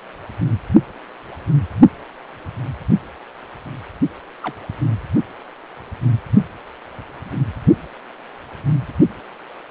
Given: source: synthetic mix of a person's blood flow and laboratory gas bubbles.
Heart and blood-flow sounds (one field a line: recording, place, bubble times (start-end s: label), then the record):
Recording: Doppler ultrasound of blood flow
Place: precordium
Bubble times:
4.43-4.54 s: bubbles
From the record:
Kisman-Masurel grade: 111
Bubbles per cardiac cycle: 1 to 2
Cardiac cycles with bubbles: 1 to 10%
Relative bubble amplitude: barely perceptible (0.100 to 0.250)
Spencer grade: 1 (occasional bubble signal discernible with the cardiac motion signal, with majority of cardiac periods free of bubbles)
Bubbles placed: only in the low amplitude regions of the cardiac cycle